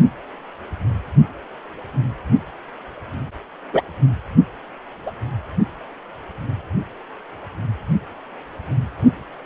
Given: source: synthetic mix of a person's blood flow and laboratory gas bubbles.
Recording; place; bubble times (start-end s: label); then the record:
Doppler ultrasound of blood flow; precordium
3.73-3.82 s: bubbles
5.06-5.11 s: bubbles
From the record:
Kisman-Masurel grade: 123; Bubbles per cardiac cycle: 1 to 2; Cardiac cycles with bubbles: 10 to 50%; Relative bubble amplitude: loud (0.450 to 0.775); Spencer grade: 2 (many but less than half of the cardiac periods contain bubble signals, singularly or in groups); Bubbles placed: only in the low amplitude regions of the cardiac cycle